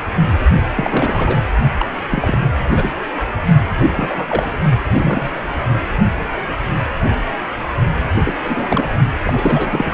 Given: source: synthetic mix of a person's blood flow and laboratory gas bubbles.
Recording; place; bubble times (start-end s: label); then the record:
Doppler ultrasound of blood flow; precordium
0.75-1.38 s: bubbles
1.77-1.86 s: bubbles
2.10-2.38 s: bubbles
2.69-2.89 s: bubbles
3.79-3.85 s: bubbles
3.91-4.58 s: bubbles
4.92-5.29 s: bubbles
8.25-8.34 s: bubbles
8.43-8.88 s: bubbles
9.25-9.94 s: bubbles
From the record:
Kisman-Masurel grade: 232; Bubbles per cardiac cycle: several, 3 to 8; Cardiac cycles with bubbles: 50 to 99%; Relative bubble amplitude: moderate (0.250 to 0.450); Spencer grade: 3 (all of the cardiac periods contain showers or single bubble signals, but not dominating or overriding the cardiac motion signals); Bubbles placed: only in the low amplitude regions of the cardiac cycle